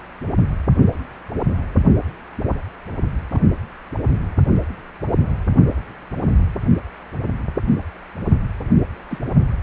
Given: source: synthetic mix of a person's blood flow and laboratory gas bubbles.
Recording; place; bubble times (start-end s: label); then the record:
Doppler ultrasound of blood flow; precordium
3.30-3.41 s: bubbles
9.10-9.19 s: bubbles
From the record:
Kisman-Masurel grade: 121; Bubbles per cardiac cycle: 1 to 2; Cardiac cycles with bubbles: 10 to 50%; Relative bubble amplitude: barely perceptible (0.100 to 0.250); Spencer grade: 2 (many but less than half of the cardiac periods contain bubble signals, singularly or in groups); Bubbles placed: anywhere in the cardiac cycle